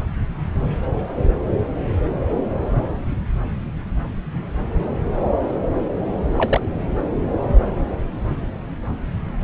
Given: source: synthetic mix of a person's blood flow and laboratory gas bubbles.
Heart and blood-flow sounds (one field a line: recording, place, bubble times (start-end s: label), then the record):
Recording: Doppler ultrasound of blood flow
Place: subclavian vein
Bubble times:
6.38-6.61 s: bubbles
From the record:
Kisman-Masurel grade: 112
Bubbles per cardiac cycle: 1 to 2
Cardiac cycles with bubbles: 1 to 10%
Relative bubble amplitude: moderate (0.250 to 0.450)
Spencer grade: 1 (occasional bubble signal discernible with the cardiac motion signal, with majority of cardiac periods free of bubbles)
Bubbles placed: anywhere in the cardiac cycle